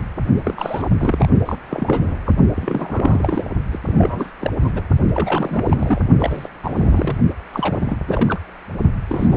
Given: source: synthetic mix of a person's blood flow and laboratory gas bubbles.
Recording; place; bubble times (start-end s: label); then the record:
Doppler ultrasound of blood flow; precordium
0.45-0.90 s: bubbles
0.98-1.26 s: bubbles
1.46-1.56 s: bubbles
1.69-2.20 s: bubbles
2.25-2.31 s: bubbles
2.54-3.50 s: bubbles
3.72-3.79 s: bubbles
3.86-4.32 s: bubbles
4.40-4.50 s: bubbles
4.62-4.82 s: bubbles
5.10-6.01 s: bubbles
6.19-6.48 s: bubbles
6.62-7.16 s: bubbles
7.53-7.98 s: bubbles
8.07-8.39 s: bubbles
9.09-9.37 s: bubbles
From the record:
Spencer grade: 3 (all of the cardiac periods contain showers or single bubble signals, but not dominating or overriding the cardiac motion signals); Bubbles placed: only in the low amplitude regions of the cardiac cycle